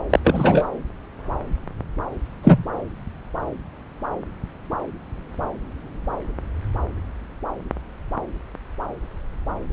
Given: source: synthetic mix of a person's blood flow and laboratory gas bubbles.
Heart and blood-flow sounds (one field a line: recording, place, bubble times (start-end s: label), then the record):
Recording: Doppler ultrasound of blood flow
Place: subclavian vein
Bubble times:
0.10-0.20 s: bubbles
0.24-0.67 s: bubbles
2.44-2.63 s: bubbles
From the record:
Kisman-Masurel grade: 223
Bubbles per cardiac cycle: several, 3 to 8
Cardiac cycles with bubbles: 10 to 50%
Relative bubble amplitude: loud (0.450 to 0.775)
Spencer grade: 2 (many but less than half of the cardiac periods contain bubble signals, singularly or in groups)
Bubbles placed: anywhere in the cardiac cycle